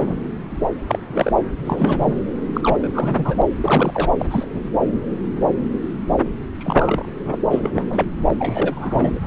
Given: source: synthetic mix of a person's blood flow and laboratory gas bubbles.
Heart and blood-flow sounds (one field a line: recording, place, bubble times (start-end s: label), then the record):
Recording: Doppler ultrasound of blood flow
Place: subclavian vein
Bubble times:
0.00-0.15 s: bubbles
0.88-0.99 s: bubbles
1.07-1.32 s: bubbles
1.64-2.14 s: bubbles
2.54-3.42 s: bubbles
3.60-4.09 s: bubbles
4.19-4.25 s: bubbles
4.30-4.48 s: bubbles
4.51-4.60 s: bubbles
6.58-7.06 s: bubbles
7.25-7.38 s: bubbles
7.50-7.70 s: bubbles
7.74-7.85 s: bubbles
7.89-8.14 s: bubbles
8.38-9.20 s: bubbles
From the record:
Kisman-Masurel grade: 232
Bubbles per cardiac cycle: several, 3 to 8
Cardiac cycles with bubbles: 50 to 99%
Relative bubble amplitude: moderate (0.250 to 0.450)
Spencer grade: 3 (all of the cardiac periods contain showers or single bubble signals, but not dominating or overriding the cardiac motion signals)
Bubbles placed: anywhere in the cardiac cycle